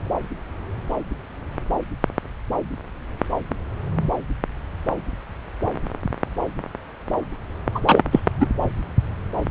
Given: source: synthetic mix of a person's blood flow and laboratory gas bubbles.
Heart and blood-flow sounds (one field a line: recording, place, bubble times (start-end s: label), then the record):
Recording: Doppler ultrasound of blood flow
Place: subclavian vein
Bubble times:
7.75-7.80 s: bubbles
7.86-8.02 s: bubbles
8.12-8.20 s: bubbles
8.39-8.47 s: bubbles
From the record:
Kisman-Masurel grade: 213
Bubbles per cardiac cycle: several, 3 to 8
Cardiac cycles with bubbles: 1 to 10%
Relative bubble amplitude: loud (0.450 to 0.775)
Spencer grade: 1 (occasional bubble signal discernible with the cardiac motion signal, with majority of cardiac periods free of bubbles)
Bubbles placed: anywhere in the cardiac cycle